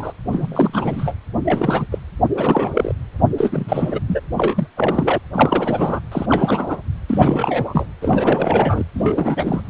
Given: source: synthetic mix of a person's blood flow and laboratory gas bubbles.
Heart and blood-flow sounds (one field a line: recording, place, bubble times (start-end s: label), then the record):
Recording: Doppler ultrasound of blood flow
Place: precordium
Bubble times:
0.00-0.13 s: bubbles
0.32-1.14 s: bubbles
1.45-1.86 s: bubbles
1.91-1.98 s: bubbles
2.34-2.71 s: bubbles
2.74-2.93 s: bubbles
3.37-4.00 s: bubbles
4.07-4.20 s: bubbles
4.29-4.67 s: bubbles
4.77-5.18 s: bubbles
5.32-6.01 s: bubbles
6.12-6.26 s: bubbles
6.29-6.77 s: bubbles
7.09-7.86 s: bubbles
8.01-8.85 s: bubbles
8.94-9.62 s: bubbles
From the record:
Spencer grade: 3 (all of the cardiac periods contain showers or single bubble signals, but not dominating or overriding the cardiac motion signals)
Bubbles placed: anywhere in the cardiac cycle